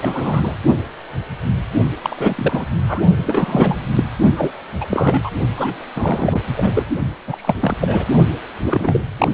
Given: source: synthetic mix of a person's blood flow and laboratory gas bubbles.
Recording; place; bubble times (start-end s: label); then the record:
Doppler ultrasound of blood flow; precordium
0.00-0.53 s: bubbles
2.02-2.65 s: bubbles
2.70-3.03 s: bubbles
3.26-3.75 s: bubbles
3.95-4.04 s: bubbles
4.36-4.53 s: bubbles
4.80-4.88 s: bubbles
4.91-5.30 s: bubbles
5.55-5.91 s: bubbles
5.96-6.41 s: bubbles
6.57-6.83 s: bubbles
7.27-7.55 s: bubbles
7.60-7.74 s: bubbles
7.80-8.05 s: bubbles
8.61-9.01 s: bubbles
9.18-9.29 s: bubbles
From the record:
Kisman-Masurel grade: 333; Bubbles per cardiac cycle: rolling drumbeat, 9 or more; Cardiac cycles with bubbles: 50 to 99%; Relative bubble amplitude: loud (0.450 to 0.775); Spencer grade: 3 (all of the cardiac periods contain showers or single bubble signals, but not dominating or overriding the cardiac motion signals); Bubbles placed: only in the low amplitude regions of the cardiac cycle